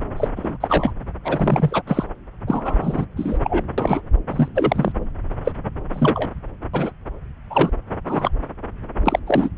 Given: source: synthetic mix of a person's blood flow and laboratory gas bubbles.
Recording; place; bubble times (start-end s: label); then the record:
Doppler ultrasound of blood flow; subclavian vein
0.16-0.28 s: bubbles
0.36-0.57 s: bubbles
0.60-0.92 s: bubbles
1.24-1.82 s: bubbles
1.87-2.04 s: bubbles
2.47-3.05 s: bubbles
3.16-3.38 s: bubbles
3.44-3.65 s: bubbles
3.77-4.01 s: bubbles
4.30-4.48 s: bubbles
4.55-4.92 s: bubbles
5.44-5.52 s: bubbles
5.93-6.29 s: bubbles
6.73-6.90 s: bubbles
7.50-7.71 s: bubbles
8.05-8.31 s: bubbles
9.05-9.19 s: bubbles
9.26-9.49 s: bubbles
From the record:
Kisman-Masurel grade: 243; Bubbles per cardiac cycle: several, 3 to 8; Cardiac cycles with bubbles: 100%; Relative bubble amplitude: loud (0.450 to 0.775); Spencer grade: 3 (all of the cardiac periods contain showers or single bubble signals, but not dominating or overriding the cardiac motion signals); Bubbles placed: anywhere in the cardiac cycle